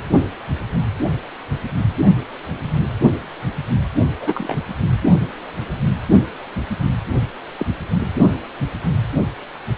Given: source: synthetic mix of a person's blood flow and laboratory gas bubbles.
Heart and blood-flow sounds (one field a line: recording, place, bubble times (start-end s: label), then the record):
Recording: Doppler ultrasound of blood flow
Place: precordium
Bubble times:
4.20-4.58 s: bubbles
7.59-7.66 s: bubbles
From the record:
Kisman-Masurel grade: 122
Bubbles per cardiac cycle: 1 to 2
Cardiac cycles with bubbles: 10 to 50%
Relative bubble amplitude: moderate (0.250 to 0.450)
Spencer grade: 2 (many but less than half of the cardiac periods contain bubble signals, singularly or in groups)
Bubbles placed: only in the low amplitude regions of the cardiac cycle